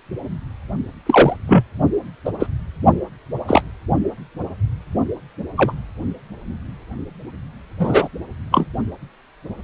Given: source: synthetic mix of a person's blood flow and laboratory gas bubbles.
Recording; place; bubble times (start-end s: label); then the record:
Doppler ultrasound of blood flow; precordium
1.05-1.36 s: bubbles
1.47-1.64 s: bubbles
2.25-2.31 s: bubbles
2.40-2.47 s: bubbles
3.48-3.61 s: bubbles
5.57-5.72 s: bubbles
7.79-8.08 s: bubbles
8.52-8.67 s: bubbles
From the record:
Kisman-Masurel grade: 123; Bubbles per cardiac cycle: 1 to 2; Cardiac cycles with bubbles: 10 to 50%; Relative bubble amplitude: loud (0.450 to 0.775); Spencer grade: 2 (many but less than half of the cardiac periods contain bubble signals, singularly or in groups); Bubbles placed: only in the low amplitude regions of the cardiac cycle